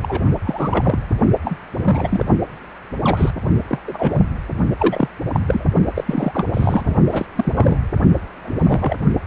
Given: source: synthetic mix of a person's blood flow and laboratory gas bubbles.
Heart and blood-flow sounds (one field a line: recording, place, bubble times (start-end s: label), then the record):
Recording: Doppler ultrasound of blood flow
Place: precordium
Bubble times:
0.02-0.22 s: bubbles
0.44-1.01 s: bubbles
1.45-1.56 s: bubbles
1.73-2.25 s: bubbles
3.03-3.31 s: bubbles
3.68-3.78 s: bubbles
3.87-4.23 s: bubbles
4.78-5.09 s: bubbles
5.32-5.40 s: bubbles
5.47-5.67 s: bubbles
5.95-6.46 s: bubbles
6.54-6.94 s: bubbles
7.11-7.26 s: bubbles
7.36-7.78 s: bubbles
8.36-8.96 s: bubbles
From the record:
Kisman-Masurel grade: 242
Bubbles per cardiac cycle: several, 3 to 8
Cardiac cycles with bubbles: 100%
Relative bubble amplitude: moderate (0.250 to 0.450)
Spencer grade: 3 (all of the cardiac periods contain showers or single bubble signals, but not dominating or overriding the cardiac motion signals)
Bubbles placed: only in the low amplitude regions of the cardiac cycle